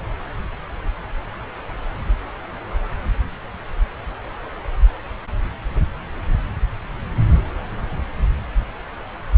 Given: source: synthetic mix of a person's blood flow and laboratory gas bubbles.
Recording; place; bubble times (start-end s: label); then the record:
Doppler ultrasound of blood flow; subclavian vein
no bubbles
From the record:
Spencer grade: 0 (complete lack of bubble signals)